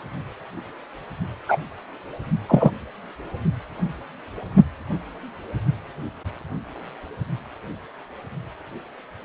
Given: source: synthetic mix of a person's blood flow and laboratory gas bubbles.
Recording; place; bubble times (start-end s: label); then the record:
Doppler ultrasound of blood flow; precordium
1.48-1.57 s: bubbles
2.49-2.71 s: bubbles
From the record:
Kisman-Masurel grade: 123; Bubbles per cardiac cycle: 1 to 2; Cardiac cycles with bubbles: 10 to 50%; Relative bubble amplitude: loud (0.450 to 0.775); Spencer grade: 2 (many but less than half of the cardiac periods contain bubble signals, singularly or in groups); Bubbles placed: only in the low amplitude regions of the cardiac cycle